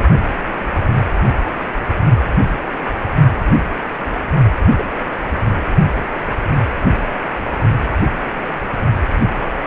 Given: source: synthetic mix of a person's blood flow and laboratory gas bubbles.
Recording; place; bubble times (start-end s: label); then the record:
Doppler ultrasound of blood flow; precordium
4.79-4.83 s: bubbles
9.20-9.28 s: bubbles
9.34-9.50 s: bubbles
From the record:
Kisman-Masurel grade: 121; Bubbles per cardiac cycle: 1 to 2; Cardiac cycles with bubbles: 10 to 50%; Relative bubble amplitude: barely perceptible (0.100 to 0.250); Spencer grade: 2 (many but less than half of the cardiac periods contain bubble signals, singularly or in groups); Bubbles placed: only in the low amplitude regions of the cardiac cycle